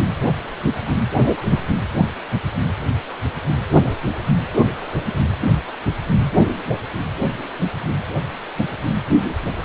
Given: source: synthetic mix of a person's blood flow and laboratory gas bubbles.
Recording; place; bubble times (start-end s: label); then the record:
Doppler ultrasound of blood flow; precordium
no bubbles
From the record:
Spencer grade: 0 (complete lack of bubble signals)